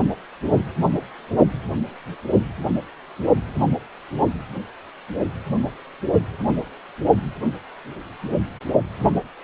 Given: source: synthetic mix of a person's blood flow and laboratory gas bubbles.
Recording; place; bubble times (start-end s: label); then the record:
Doppler ultrasound of blood flow; precordium
no bubbles
From the record:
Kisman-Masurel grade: 000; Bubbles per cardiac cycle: 0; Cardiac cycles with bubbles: 0%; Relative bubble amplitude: no bubbles discernible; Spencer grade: 0 (complete lack of bubble signals)